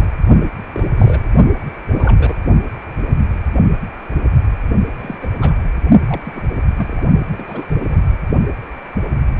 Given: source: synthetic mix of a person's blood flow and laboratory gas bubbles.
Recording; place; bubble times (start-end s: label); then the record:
Doppler ultrasound of blood flow; precordium
0.00-0.08 s: bubbles
0.72-0.85 s: bubbles
0.94-1.20 s: bubbles
1.23-1.29 s: bubbles
1.90-2.35 s: bubbles
4.98-5.17 s: bubbles
5.21-5.34 s: bubbles
5.41-5.54 s: bubbles
6.08-6.43 s: bubbles
6.76-7.03 s: bubbles
7.31-7.64 s: bubbles
7.68-7.99 s: bubbles
From the record:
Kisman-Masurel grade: 232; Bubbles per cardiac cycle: several, 3 to 8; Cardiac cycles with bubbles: 50 to 99%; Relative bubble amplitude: moderate (0.250 to 0.450); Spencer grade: 3 (all of the cardiac periods contain showers or single bubble signals, but not dominating or overriding the cardiac motion signals); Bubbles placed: only in the low amplitude regions of the cardiac cycle